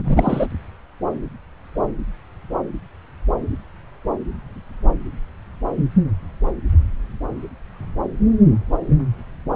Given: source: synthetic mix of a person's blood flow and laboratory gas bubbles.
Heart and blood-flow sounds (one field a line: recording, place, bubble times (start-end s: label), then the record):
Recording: Doppler ultrasound of blood flow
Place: subclavian vein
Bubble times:
0.00-0.47 s: bubbles
From the record:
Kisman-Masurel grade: 213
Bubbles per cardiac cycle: several, 3 to 8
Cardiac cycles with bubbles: 1 to 10%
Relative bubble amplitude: loud (0.450 to 0.775)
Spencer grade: 1 (occasional bubble signal discernible with the cardiac motion signal, with majority of cardiac periods free of bubbles)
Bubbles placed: anywhere in the cardiac cycle